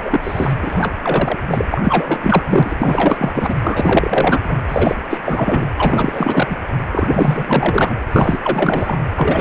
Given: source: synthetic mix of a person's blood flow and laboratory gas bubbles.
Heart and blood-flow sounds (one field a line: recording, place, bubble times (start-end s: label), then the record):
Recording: Doppler ultrasound of blood flow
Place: precordium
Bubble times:
0.02-0.20 s: bubbles
0.23-0.53 s: bubbles
0.62-0.93 s: bubbles
1.02-1.39 s: bubbles
1.48-1.66 s: bubbles
1.72-2.43 s: bubbles
2.50-2.76 s: bubbles
2.79-3.54 s: bubbles
3.63-4.41 s: bubbles
4.44-4.59 s: bubbles
4.69-4.96 s: bubbles
5.09-5.18 s: bubbles
5.25-5.66 s: bubbles
5.77-6.55 s: bubbles
6.92-7.96 s: bubbles
8.12-8.38 s: bubbles
8.43-9.03 s: bubbles
9.16-9.41 s: bubbles
From the record:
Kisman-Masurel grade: 444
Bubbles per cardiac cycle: continuous sound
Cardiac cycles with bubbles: 100%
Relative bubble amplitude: maximal (0.775 to 0.999)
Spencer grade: 4 (maximum detectable bubble signal sounding continuously throughout systole and diastole of every cardiac period, and overriding the amplitude of the normal cardiac signals)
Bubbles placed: anywhere in the cardiac cycle